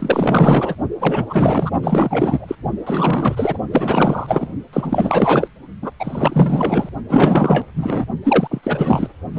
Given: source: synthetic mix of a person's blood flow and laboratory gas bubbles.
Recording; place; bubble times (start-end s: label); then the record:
Doppler ultrasound of blood flow; precordium
0.00-0.75 s: bubbles
1.00-1.25 s: bubbles
1.29-1.70 s: bubbles
1.82-2.55 s: bubbles
2.86-3.58 s: bubbles
3.71-4.53 s: bubbles
4.73-5.48 s: bubbles
5.82-5.91 s: bubbles
6.00-6.89 s: bubbles
7.09-7.67 s: bubbles
7.76-8.05 s: bubbles
8.24-8.47 s: bubbles
8.50-9.08 s: bubbles
9.31-9.39 s: bubbles
From the record:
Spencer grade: 4 (maximum detectable bubble signal sounding continuously throughout systole and diastole of every cardiac period, and overriding the amplitude of the normal cardiac signals); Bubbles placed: only in the low amplitude regions of the cardiac cycle